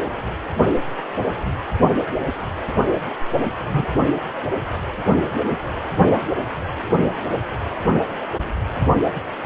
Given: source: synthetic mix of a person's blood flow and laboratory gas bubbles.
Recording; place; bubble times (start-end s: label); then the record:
Doppler ultrasound of blood flow; precordium
3.68-3.85 s: bubbles
From the record:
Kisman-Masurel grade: 123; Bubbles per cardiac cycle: 1 to 2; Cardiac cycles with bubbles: 10 to 50%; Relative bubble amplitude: loud (0.450 to 0.775); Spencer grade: 2 (many but less than half of the cardiac periods contain bubble signals, singularly or in groups); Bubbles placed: only in the low amplitude regions of the cardiac cycle